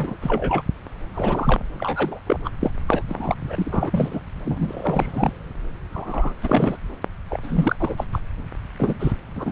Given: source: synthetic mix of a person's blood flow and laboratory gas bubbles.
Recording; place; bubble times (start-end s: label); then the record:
Doppler ultrasound of blood flow; subclavian vein
0.00-0.17 s: bubbles
0.21-0.62 s: bubbles
1.14-1.62 s: bubbles
1.77-2.20 s: bubbles
2.26-2.40 s: bubbles
2.44-2.49 s: bubbles
2.60-2.71 s: bubbles
2.88-3.04 s: bubbles
3.09-3.35 s: bubbles
3.48-4.20 s: bubbles
4.45-5.33 s: bubbles
5.92-6.34 s: bubbles
6.42-6.78 s: bubbles
7.30-7.40 s: bubbles
7.43-7.76 s: bubbles
7.79-8.04 s: bubbles
8.12-8.19 s: bubbles
8.79-9.12 s: bubbles
9.35-9.52 s: bubbles
From the record:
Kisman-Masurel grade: 342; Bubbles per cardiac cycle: rolling drumbeat, 9 or more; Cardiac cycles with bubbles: 100%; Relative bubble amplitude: moderate (0.250 to 0.450); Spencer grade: 3 (all of the cardiac periods contain showers or single bubble signals, but not dominating or overriding the cardiac motion signals); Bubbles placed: anywhere in the cardiac cycle